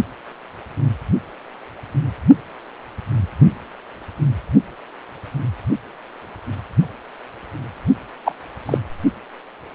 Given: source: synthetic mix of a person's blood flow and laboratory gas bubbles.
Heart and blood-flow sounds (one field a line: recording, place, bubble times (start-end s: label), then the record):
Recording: Doppler ultrasound of blood flow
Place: precordium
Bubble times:
8.25-8.34 s: bubbles
8.65-8.78 s: bubbles
From the record:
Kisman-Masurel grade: 113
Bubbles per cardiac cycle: 1 to 2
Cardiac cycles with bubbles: 1 to 10%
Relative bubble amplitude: loud (0.450 to 0.775)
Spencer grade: 1 (occasional bubble signal discernible with the cardiac motion signal, with majority of cardiac periods free of bubbles)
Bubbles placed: only in the low amplitude regions of the cardiac cycle